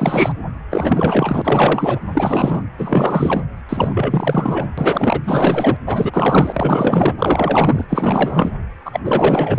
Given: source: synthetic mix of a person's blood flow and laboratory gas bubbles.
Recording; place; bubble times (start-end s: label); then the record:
Doppler ultrasound of blood flow; precordium
0.00-0.34 s: bubbles
0.70-2.00 s: bubbles
2.13-2.62 s: bubbles
2.78-3.44 s: bubbles
3.69-4.71 s: bubbles
4.77-5.21 s: bubbles
5.24-5.77 s: bubbles
5.86-7.14 s: bubbles
7.18-7.86 s: bubbles
7.89-8.52 s: bubbles
8.85-9.00 s: bubbles
9.04-9.59 s: bubbles
From the record:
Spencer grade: 4 (maximum detectable bubble signal sounding continuously throughout systole and diastole of every cardiac period, and overriding the amplitude of the normal cardiac signals); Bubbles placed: anywhere in the cardiac cycle